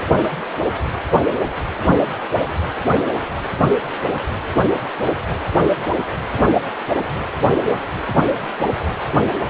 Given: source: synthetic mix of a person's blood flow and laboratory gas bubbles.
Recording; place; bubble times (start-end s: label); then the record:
Doppler ultrasound of blood flow; precordium
no bubbles
From the record:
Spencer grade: 0 (complete lack of bubble signals)